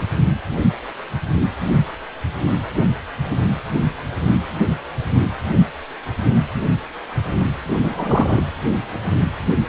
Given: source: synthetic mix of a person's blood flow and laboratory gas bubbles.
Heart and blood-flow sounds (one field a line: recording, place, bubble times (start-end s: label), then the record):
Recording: Doppler ultrasound of blood flow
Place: precordium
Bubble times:
7.83-8.43 s: bubbles
From the record:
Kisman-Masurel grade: 113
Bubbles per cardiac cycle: 1 to 2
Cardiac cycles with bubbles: 1 to 10%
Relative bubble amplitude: loud (0.450 to 0.775)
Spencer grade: 1 (occasional bubble signal discernible with the cardiac motion signal, with majority of cardiac periods free of bubbles)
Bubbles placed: anywhere in the cardiac cycle